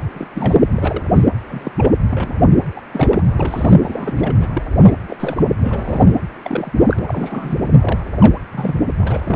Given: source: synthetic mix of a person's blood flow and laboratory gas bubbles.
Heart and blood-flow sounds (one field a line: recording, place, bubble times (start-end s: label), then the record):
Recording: Doppler ultrasound of blood flow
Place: precordium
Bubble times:
0.14-0.27 s: bubbles
0.32-0.63 s: bubbles
0.74-1.03 s: bubbles
1.10-1.24 s: bubbles
1.48-1.71 s: bubbles
1.77-1.92 s: bubbles
2.09-2.50 s: bubbles
2.75-2.81 s: bubbles
2.92-3.23 s: bubbles
3.36-3.75 s: bubbles
3.82-4.36 s: bubbles
4.40-4.47 s: bubbles
4.54-4.62 s: bubbles
4.79-4.95 s: bubbles
5.08-5.16 s: bubbles
5.20-5.50 s: bubbles
5.62-6.15 s: bubbles
6.43-6.71 s: bubbles
6.79-6.96 s: bubbles
7.08-7.58 s: bubbles
7.81-7.99 s: bubbles
8.15-8.41 s: bubbles
8.53-8.82 s: bubbles
8.99-9.36 s: bubbles
From the record:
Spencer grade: 3 (all of the cardiac periods contain showers or single bubble signals, but not dominating or overriding the cardiac motion signals)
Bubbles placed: anywhere in the cardiac cycle